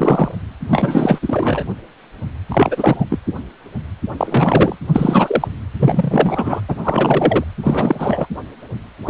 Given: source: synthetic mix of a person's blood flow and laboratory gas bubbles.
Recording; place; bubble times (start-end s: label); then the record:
Doppler ultrasound of blood flow; precordium
0.00-0.31 s: bubbles
0.70-1.19 s: bubbles
1.22-1.64 s: bubbles
2.48-3.05 s: bubbles
3.09-3.19 s: bubbles
4.18-4.76 s: bubbles
4.92-5.48 s: bubbles
5.79-6.61 s: bubbles
6.68-6.75 s: bubbles
6.83-7.44 s: bubbles
7.63-8.27 s: bubbles
9.05-9.10 s: bubbles
From the record:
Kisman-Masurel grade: 333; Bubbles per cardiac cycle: rolling drumbeat, 9 or more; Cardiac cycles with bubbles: 50 to 99%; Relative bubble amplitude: loud (0.450 to 0.775); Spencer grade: 3 (all of the cardiac periods contain showers or single bubble signals, but not dominating or overriding the cardiac motion signals); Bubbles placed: anywhere in the cardiac cycle